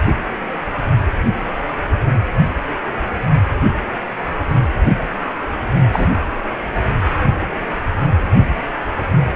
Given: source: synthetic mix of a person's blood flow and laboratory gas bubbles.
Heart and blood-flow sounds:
Doppler ultrasound of blood flow; precordium
5.92-6.08 s: bubbles
From the record:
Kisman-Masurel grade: 113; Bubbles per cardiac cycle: 1 to 2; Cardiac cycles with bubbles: 1 to 10%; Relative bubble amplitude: loud (0.450 to 0.775); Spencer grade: 1 (occasional bubble signal discernible with the cardiac motion signal, with majority of cardiac periods free of bubbles); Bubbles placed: only in the low amplitude regions of the cardiac cycle

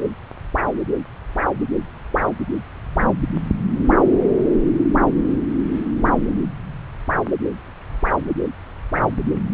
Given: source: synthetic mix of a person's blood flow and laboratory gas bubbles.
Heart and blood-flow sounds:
Doppler ultrasound of blood flow; subclavian vein
9.52-9.54 s: bubbles
From the record:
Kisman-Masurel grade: 111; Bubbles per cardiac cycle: 1 to 2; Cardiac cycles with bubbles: 1 to 10%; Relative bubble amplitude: barely perceptible (0.100 to 0.250); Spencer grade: 1 (occasional bubble signal discernible with the cardiac motion signal, with majority of cardiac periods free of bubbles); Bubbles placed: anywhere in the cardiac cycle

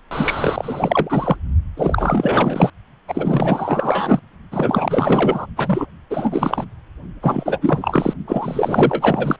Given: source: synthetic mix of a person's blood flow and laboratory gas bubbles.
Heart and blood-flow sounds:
Doppler ultrasound of blood flow; precordium
0.11-1.36 s: bubbles
1.77-2.70 s: bubbles
3.07-4.20 s: bubbles
4.52-5.47 s: bubbles
5.56-5.87 s: bubbles
6.10-6.65 s: bubbles
7.22-7.58 s: bubbles
7.61-8.13 s: bubbles
8.27-9.36 s: bubbles
From the record:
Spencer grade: 4 (maximum detectable bubble signal sounding continuously throughout systole and diastole of every cardiac period, and overriding the amplitude of the normal cardiac signals); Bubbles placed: only in the low amplitude regions of the cardiac cycle

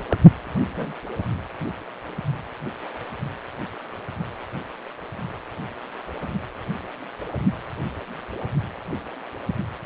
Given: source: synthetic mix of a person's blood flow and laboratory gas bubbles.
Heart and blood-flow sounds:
Doppler ultrasound of blood flow; precordium
0.08-0.18 s: bubbles
0.72-0.92 s: bubbles
From the record:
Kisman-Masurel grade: 112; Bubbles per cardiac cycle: 1 to 2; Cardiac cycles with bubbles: 1 to 10%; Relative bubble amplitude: moderate (0.250 to 0.450); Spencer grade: 1 (occasional bubble signal discernible with the cardiac motion signal, with majority of cardiac periods free of bubbles); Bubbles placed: anywhere in the cardiac cycle

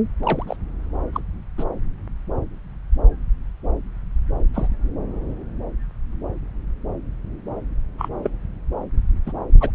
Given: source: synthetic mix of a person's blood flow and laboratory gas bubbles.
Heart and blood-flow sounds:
Doppler ultrasound of blood flow; subclavian vein
0.23-0.56 s: bubbles
1.12-1.21 s: bubbles
1.58-1.64 s: bubbles
4.54-4.68 s: bubbles
7.98-8.09 s: bubbles
8.23-8.30 s: bubbles
9.26-9.32 s: bubbles
9.60-9.71 s: bubbles
From the record:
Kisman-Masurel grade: 122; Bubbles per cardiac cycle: 1 to 2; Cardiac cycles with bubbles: 10 to 50%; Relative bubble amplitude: moderate (0.250 to 0.450); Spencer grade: 2 (many but less than half of the cardiac periods contain bubble signals, singularly or in groups); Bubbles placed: anywhere in the cardiac cycle

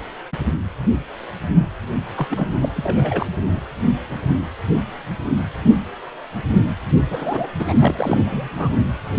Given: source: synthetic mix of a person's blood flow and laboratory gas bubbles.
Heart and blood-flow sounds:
Doppler ultrasound of blood flow; precordium
2.16-2.27 s: bubbles
2.30-2.48 s: bubbles
2.60-2.69 s: bubbles
2.75-3.26 s: bubbles
6.95-7.01 s: bubbles
7.07-7.46 s: bubbles
7.58-7.74 s: bubbles
7.79-7.95 s: bubbles
7.98-8.49 s: bubbles
8.57-8.76 s: bubbles
From the record:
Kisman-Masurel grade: 332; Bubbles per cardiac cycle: rolling drumbeat, 9 or more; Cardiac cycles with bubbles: 50 to 99%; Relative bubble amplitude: moderate (0.250 to 0.450); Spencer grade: 3 (all of the cardiac periods contain showers or single bubble signals, but not dominating or overriding the cardiac motion signals); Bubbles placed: anywhere in the cardiac cycle

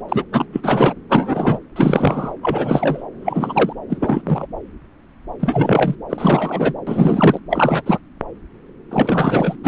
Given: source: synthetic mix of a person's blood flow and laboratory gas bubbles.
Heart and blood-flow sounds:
Doppler ultrasound of blood flow; subclavian vein
0.08-0.24 s: bubbles
0.32-0.45 s: bubbles
0.53-0.60 s: bubbles
0.63-0.93 s: bubbles
1.08-1.60 s: bubbles
1.75-2.33 s: bubbles
2.42-3.03 s: bubbles
3.21-3.73 s: bubbles
3.89-4.46 s: bubbles
5.39-5.96 s: bubbles
6.09-6.74 s: bubbles
6.87-7.39 s: bubbles
7.50-7.82 s: bubbles
7.85-7.99 s: bubbles
8.91-9.56 s: bubbles
9.62-9.68 s: bubbles
From the record:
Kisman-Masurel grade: 333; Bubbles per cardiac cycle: rolling drumbeat, 9 or more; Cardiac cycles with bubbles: 50 to 99%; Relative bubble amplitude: loud (0.450 to 0.775); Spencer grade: 3 (all of the cardiac periods contain showers or single bubble signals, but not dominating or overriding the cardiac motion signals); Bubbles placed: anywhere in the cardiac cycle

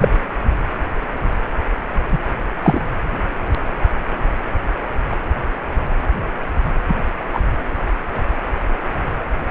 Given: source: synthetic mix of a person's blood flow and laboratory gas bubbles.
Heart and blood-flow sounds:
Doppler ultrasound of blood flow; precordium
0.01-0.09 s: bubbles
2.12-2.19 s: bubbles
2.62-2.85 s: bubbles
6.88-6.95 s: bubbles
7.33-7.40 s: bubbles
From the record:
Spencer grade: 2 (many but less than half of the cardiac periods contain bubble signals, singularly or in groups); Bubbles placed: anywhere in the cardiac cycle

